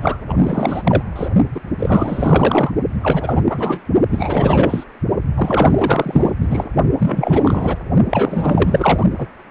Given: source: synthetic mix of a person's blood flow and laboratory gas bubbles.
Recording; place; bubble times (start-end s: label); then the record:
Doppler ultrasound of blood flow; precordium
0.02-0.19 s: bubbles
0.27-1.02 s: bubbles
1.16-1.28 s: bubbles
1.54-1.60 s: bubbles
1.78-2.71 s: bubbles
3.01-3.42 s: bubbles
3.49-3.80 s: bubbles
4.10-4.83 s: bubbles
5.35-6.31 s: bubbles
6.41-6.68 s: bubbles
6.98-7.77 s: bubbles
8.09-9.06 s: bubbles
9.17-9.27 s: bubbles
From the record:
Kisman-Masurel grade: 444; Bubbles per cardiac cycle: continuous sound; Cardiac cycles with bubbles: 100%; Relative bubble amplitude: maximal (0.775 to 0.999); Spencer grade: 4 (maximum detectable bubble signal sounding continuously throughout systole and diastole of every cardiac period, and overriding the amplitude of the normal cardiac signals); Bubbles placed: only in the low amplitude regions of the cardiac cycle